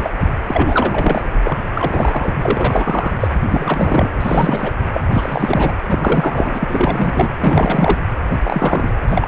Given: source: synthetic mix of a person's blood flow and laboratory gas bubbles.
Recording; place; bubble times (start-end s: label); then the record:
Doppler ultrasound of blood flow; precordium
0.00-0.12 s: bubbles
0.18-0.25 s: bubbles
0.47-1.22 s: bubbles
1.43-1.67 s: bubbles
1.74-2.34 s: bubbles
2.42-3.16 s: bubbles
3.20-3.28 s: bubbles
3.48-4.10 s: bubbles
4.20-4.73 s: bubbles
4.94-5.01 s: bubbles
5.12-5.77 s: bubbles
5.88-6.65 s: bubbles
6.68-7.31 s: bubbles
7.40-7.98 s: bubbles
8.29-8.35 s: bubbles
8.43-8.96 s: bubbles
9.06-9.28 s: bubbles
From the record:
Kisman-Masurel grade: 343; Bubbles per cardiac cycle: rolling drumbeat, 9 or more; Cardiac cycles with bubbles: 100%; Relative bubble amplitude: loud (0.450 to 0.775); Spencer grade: 3 (all of the cardiac periods contain showers or single bubble signals, but not dominating or overriding the cardiac motion signals); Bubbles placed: anywhere in the cardiac cycle